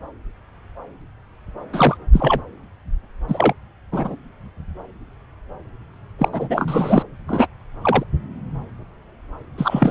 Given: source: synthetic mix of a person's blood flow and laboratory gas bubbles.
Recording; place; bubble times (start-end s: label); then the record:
Doppler ultrasound of blood flow; subclavian vein
1.73-1.97 s: bubbles
2.13-2.41 s: bubbles
3.28-3.53 s: bubbles
3.92-4.17 s: bubbles
6.19-6.29 s: bubbles
6.32-7.03 s: bubbles
7.28-7.48 s: bubbles
7.82-8.04 s: bubbles
9.57-9.91 s: bubbles
From the record:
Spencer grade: 2 (many but less than half of the cardiac periods contain bubble signals, singularly or in groups); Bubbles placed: anywhere in the cardiac cycle